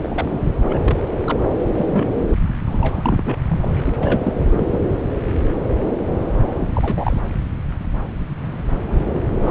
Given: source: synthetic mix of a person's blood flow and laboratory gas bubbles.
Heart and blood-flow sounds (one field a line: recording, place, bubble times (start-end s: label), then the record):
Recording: Doppler ultrasound of blood flow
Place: subclavian vein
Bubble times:
0.03-0.39 s: bubbles
0.64-0.99 s: bubbles
1.26-1.42 s: bubbles
1.67-2.32 s: bubbles
2.65-3.38 s: bubbles
3.48-3.80 s: bubbles
3.85-3.94 s: bubbles
3.98-4.47 s: bubbles
4.51-4.79 s: bubbles
6.60-7.20 s: bubbles
8.83-9.02 s: bubbles
9.14-9.25 s: bubbles
9.41-9.51 s: bubbles
From the record:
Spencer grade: 3 (all of the cardiac periods contain showers or single bubble signals, but not dominating or overriding the cardiac motion signals)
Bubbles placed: anywhere in the cardiac cycle